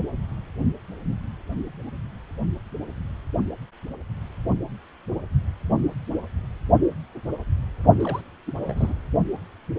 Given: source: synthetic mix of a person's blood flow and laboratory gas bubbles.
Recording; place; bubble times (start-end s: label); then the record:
Doppler ultrasound of blood flow; precordium
8.00-8.21 s: bubbles
8.46-8.53 s: bubbles
8.62-9.02 s: bubbles
From the record:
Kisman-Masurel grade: 221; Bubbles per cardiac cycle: several, 3 to 8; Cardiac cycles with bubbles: 10 to 50%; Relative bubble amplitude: barely perceptible (0.100 to 0.250); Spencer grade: 2 (many but less than half of the cardiac periods contain bubble signals, singularly or in groups); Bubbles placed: only in the low amplitude regions of the cardiac cycle